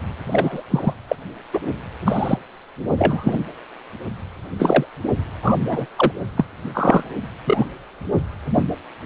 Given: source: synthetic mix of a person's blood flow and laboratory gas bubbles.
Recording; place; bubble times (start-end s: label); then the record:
Doppler ultrasound of blood flow; precordium
0.30-0.62 s: bubbles
0.70-0.94 s: bubbles
1.08-1.16 s: bubbles
1.53-1.59 s: bubbles
2.05-2.40 s: bubbles
2.97-3.43 s: bubbles
4.58-4.86 s: bubbles
5.42-5.56 s: bubbles
5.69-5.86 s: bubbles
5.96-6.12 s: bubbles
6.35-6.45 s: bubbles
6.74-7.14 s: bubbles
7.44-7.66 s: bubbles
8.54-8.66 s: bubbles
From the record:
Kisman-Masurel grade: 243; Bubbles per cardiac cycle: several, 3 to 8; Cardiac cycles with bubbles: 100%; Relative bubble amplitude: loud (0.450 to 0.775); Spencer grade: 3 (all of the cardiac periods contain showers or single bubble signals, but not dominating or overriding the cardiac motion signals); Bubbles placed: only in the low amplitude regions of the cardiac cycle